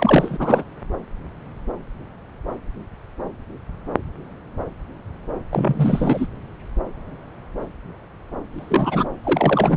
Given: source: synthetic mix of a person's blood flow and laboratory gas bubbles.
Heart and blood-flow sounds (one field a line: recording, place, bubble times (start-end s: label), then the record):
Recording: Doppler ultrasound of blood flow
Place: subclavian vein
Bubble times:
0.00-0.64 s: bubbles
5.50-6.27 s: bubbles
8.52-9.08 s: bubbles
9.23-9.77 s: bubbles
From the record:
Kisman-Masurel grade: 223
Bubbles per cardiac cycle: several, 3 to 8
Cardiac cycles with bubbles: 10 to 50%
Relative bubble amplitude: loud (0.450 to 0.775)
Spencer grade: 2 (many but less than half of the cardiac periods contain bubble signals, singularly or in groups)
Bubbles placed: anywhere in the cardiac cycle